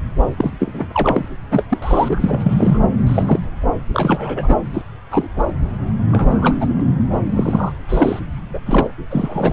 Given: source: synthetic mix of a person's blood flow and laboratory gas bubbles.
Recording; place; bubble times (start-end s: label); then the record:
Doppler ultrasound of blood flow; subclavian vein
0.36-0.51 s: bubbles
0.59-0.89 s: bubbles
0.92-1.28 s: bubbles
1.50-1.65 s: bubbles
1.69-1.78 s: bubbles
1.82-2.41 s: bubbles
2.44-2.80 s: bubbles
3.06-3.39 s: bubbles
3.94-4.56 s: bubbles
4.73-4.81 s: bubbles
5.10-5.28 s: bubbles
5.36-5.46 s: bubbles
6.11-6.56 s: bubbles
6.60-6.66 s: bubbles
6.68-6.85 s: bubbles
7.35-7.72 s: bubbles
7.89-8.20 s: bubbles
8.53-8.60 s: bubbles
8.66-8.87 s: bubbles
9.10-9.53 s: bubbles
From the record:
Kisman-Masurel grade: 243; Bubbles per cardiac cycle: several, 3 to 8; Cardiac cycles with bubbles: 100%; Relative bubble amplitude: loud (0.450 to 0.775); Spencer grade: 3 (all of the cardiac periods contain showers or single bubble signals, but not dominating or overriding the cardiac motion signals); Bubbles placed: anywhere in the cardiac cycle